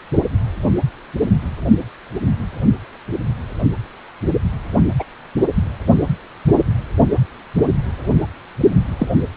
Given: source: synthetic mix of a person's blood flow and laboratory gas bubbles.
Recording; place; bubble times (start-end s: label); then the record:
Doppler ultrasound of blood flow; precordium
4.99-5.04 s: bubbles
8.98-9.07 s: bubbles
From the record:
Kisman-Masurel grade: 123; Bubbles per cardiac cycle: 1 to 2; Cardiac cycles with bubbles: 10 to 50%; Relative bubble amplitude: loud (0.450 to 0.775); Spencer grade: 2 (many but less than half of the cardiac periods contain bubble signals, singularly or in groups); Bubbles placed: only in the low amplitude regions of the cardiac cycle